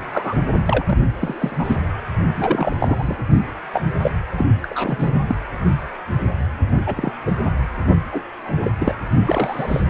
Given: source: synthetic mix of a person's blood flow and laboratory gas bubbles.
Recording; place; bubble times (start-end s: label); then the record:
Doppler ultrasound of blood flow; precordium
0.12-0.36 s: bubbles
0.65-0.99 s: bubbles
1.15-1.76 s: bubbles
2.35-2.77 s: bubbles
2.80-3.18 s: bubbles
3.73-3.81 s: bubbles
3.85-3.92 s: bubbles
4.03-4.11 s: bubbles
4.37-4.46 s: bubbles
4.62-5.21 s: bubbles
5.28-5.37 s: bubbles
6.87-7.11 s: bubbles
7.25-7.35 s: bubbles
8.12-8.21 s: bubbles
8.43-8.71 s: bubbles
8.79-8.93 s: bubbles
9.25-9.81 s: bubbles
From the record:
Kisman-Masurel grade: 242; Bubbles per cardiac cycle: several, 3 to 8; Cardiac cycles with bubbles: 100%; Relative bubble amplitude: moderate (0.250 to 0.450); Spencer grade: 3 (all of the cardiac periods contain showers or single bubble signals, but not dominating or overriding the cardiac motion signals); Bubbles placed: anywhere in the cardiac cycle